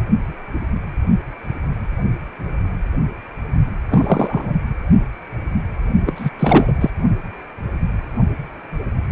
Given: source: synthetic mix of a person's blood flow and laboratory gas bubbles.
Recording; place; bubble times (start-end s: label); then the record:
Doppler ultrasound of blood flow; precordium
3.90-4.53 s: bubbles
6.05-6.12 s: bubbles
6.15-6.30 s: bubbles
6.39-6.73 s: bubbles
6.80-6.90 s: bubbles
From the record:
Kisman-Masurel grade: 223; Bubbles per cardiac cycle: several, 3 to 8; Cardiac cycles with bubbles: 10 to 50%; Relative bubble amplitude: loud (0.450 to 0.775); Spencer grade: 2 (many but less than half of the cardiac periods contain bubble signals, singularly or in groups); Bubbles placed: only in the low amplitude regions of the cardiac cycle